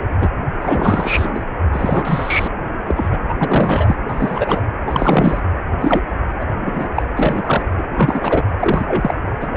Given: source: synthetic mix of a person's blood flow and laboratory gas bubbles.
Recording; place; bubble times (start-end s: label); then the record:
Doppler ultrasound of blood flow; precordium
0.20-0.30 s: bubbles
0.60-1.45 s: bubbles
1.73-2.48 s: bubbles
2.85-3.19 s: bubbles
3.29-3.34 s: bubbles
3.39-3.95 s: bubbles
4.08-4.63 s: bubbles
4.86-5.40 s: bubbles
5.80-6.01 s: bubbles
6.39-6.43 s: bubbles
6.65-6.89 s: bubbles
6.95-7.03 s: bubbles
7.16-7.63 s: bubbles
7.77-7.83 s: bubbles
7.96-8.43 s: bubbles
8.60-9.14 s: bubbles
9.41-9.47 s: bubbles
9.53-9.57 s: bubbles
From the record:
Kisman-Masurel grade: 243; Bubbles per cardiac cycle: several, 3 to 8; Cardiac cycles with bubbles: 100%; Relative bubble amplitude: loud (0.450 to 0.775); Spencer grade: 3 (all of the cardiac periods contain showers or single bubble signals, but not dominating or overriding the cardiac motion signals); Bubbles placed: anywhere in the cardiac cycle